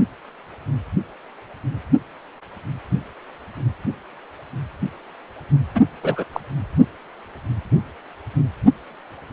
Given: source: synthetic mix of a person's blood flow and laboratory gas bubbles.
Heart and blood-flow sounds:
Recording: Doppler ultrasound of blood flow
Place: precordium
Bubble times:
5.75-5.81 s: bubbles
6.03-6.25 s: bubbles
6.33-6.41 s: bubbles
From the record:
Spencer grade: 2 (many but less than half of the cardiac periods contain bubble signals, singularly or in groups)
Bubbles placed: anywhere in the cardiac cycle

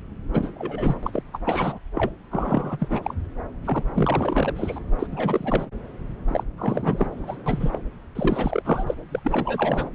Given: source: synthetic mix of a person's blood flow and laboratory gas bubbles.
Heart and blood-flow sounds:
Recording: Doppler ultrasound of blood flow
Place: subclavian vein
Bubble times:
0.32-0.50 s: bubbles
0.56-0.94 s: bubbles
1.02-1.10 s: bubbles
1.13-1.22 s: bubbles
1.33-1.39 s: bubbles
1.46-1.78 s: bubbles
1.95-2.10 s: bubbles
2.31-2.77 s: bubbles
2.79-3.14 s: bubbles
3.65-3.83 s: bubbles
3.94-4.79 s: bubbles
4.99-5.07 s: bubbles
5.11-5.66 s: bubbles
6.28-6.44 s: bubbles
6.58-7.37 s: bubbles
7.46-7.78 s: bubbles
8.15-8.95 s: bubbles
9.11-9.20 s: bubbles
9.24-9.89 s: bubbles
From the record:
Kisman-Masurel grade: 332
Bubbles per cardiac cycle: rolling drumbeat, 9 or more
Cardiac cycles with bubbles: 50 to 99%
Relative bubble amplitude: moderate (0.250 to 0.450)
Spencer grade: 3 (all of the cardiac periods contain showers or single bubble signals, but not dominating or overriding the cardiac motion signals)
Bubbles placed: anywhere in the cardiac cycle

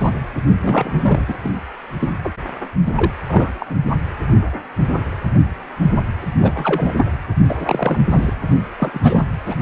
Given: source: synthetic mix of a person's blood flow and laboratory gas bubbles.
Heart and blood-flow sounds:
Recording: Doppler ultrasound of blood flow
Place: precordium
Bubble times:
0.00-0.11 s: bubbles
0.60-1.25 s: bubbles
1.28-1.34 s: bubbles
1.43-1.52 s: bubbles
1.99-2.11 s: bubbles
2.23-2.31 s: bubbles
2.84-3.11 s: bubbles
3.28-3.51 s: bubbles
3.59-3.67 s: bubbles
3.69-3.76 s: bubbles
6.21-6.33 s: bubbles
6.42-7.14 s: bubbles
7.46-7.98 s: bubbles
8.10-8.34 s: bubbles
8.49-8.56 s: bubbles
8.79-9.23 s: bubbles
9.46-9.55 s: bubbles
From the record:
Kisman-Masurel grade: 232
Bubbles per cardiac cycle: several, 3 to 8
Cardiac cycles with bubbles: 50 to 99%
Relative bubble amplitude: moderate (0.250 to 0.450)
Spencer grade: 3 (all of the cardiac periods contain showers or single bubble signals, but not dominating or overriding the cardiac motion signals)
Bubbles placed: anywhere in the cardiac cycle

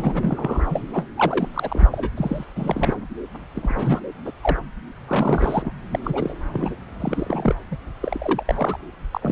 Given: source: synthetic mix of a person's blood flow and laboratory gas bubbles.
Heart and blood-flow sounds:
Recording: Doppler ultrasound of blood flow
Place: subclavian vein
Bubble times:
0.00-0.67 s: bubbles
0.70-0.85 s: bubbles
0.90-1.06 s: bubbles
1.17-1.48 s: bubbles
1.54-1.88 s: bubbles
1.92-2.10 s: bubbles
2.17-2.44 s: bubbles
2.56-3.00 s: bubbles
3.54-4.00 s: bubbles
4.25-4.31 s: bubbles
4.42-4.57 s: bubbles
5.08-5.72 s: bubbles
5.92-5.99 s: bubbles
6.04-6.35 s: bubbles
6.52-6.76 s: bubbles
7.00-7.55 s: bubbles
7.71-7.76 s: bubbles
8.02-8.43 s: bubbles
8.46-8.77 s: bubbles
9.12-9.32 s: bubbles
From the record:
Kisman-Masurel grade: 342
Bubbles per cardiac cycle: rolling drumbeat, 9 or more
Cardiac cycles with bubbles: 100%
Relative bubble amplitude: moderate (0.250 to 0.450)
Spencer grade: 3 (all of the cardiac periods contain showers or single bubble signals, but not dominating or overriding the cardiac motion signals)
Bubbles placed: anywhere in the cardiac cycle

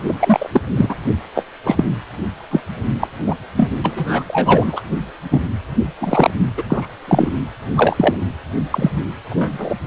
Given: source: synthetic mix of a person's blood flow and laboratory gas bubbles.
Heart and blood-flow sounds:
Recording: Doppler ultrasound of blood flow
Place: precordium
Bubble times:
0.09-0.14 s: bubbles
0.20-0.50 s: bubbles
0.53-0.61 s: bubbles
0.76-0.95 s: bubbles
1.34-1.43 s: bubbles
1.64-1.84 s: bubbles
2.51-2.60 s: bubbles
3.00-3.08 s: bubbles
3.26-3.35 s: bubbles
3.57-3.71 s: bubbles
3.84-4.24 s: bubbles
4.28-4.79 s: bubbles
5.31-5.41 s: bubbles
6.00-6.30 s: bubbles
6.57-6.63 s: bubbles
6.69-6.87 s: bubbles
7.08-7.30 s: bubbles
7.76-8.16 s: bubbles
8.71-8.90 s: bubbles
9.30-9.74 s: bubbles
From the record:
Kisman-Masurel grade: 233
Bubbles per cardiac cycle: several, 3 to 8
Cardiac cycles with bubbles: 50 to 99%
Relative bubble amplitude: loud (0.450 to 0.775)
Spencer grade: 3 (all of the cardiac periods contain showers or single bubble signals, but not dominating or overriding the cardiac motion signals)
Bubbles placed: anywhere in the cardiac cycle

